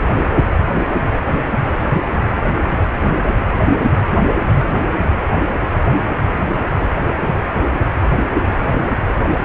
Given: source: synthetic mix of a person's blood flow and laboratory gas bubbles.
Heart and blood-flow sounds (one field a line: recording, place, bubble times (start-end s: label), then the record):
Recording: Doppler ultrasound of blood flow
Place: precordium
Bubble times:
4.25-4.65 s: bubbles
From the record:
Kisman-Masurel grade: 111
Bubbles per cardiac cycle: 1 to 2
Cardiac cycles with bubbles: 1 to 10%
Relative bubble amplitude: barely perceptible (0.100 to 0.250)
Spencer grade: 1 (occasional bubble signal discernible with the cardiac motion signal, with majority of cardiac periods free of bubbles)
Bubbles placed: anywhere in the cardiac cycle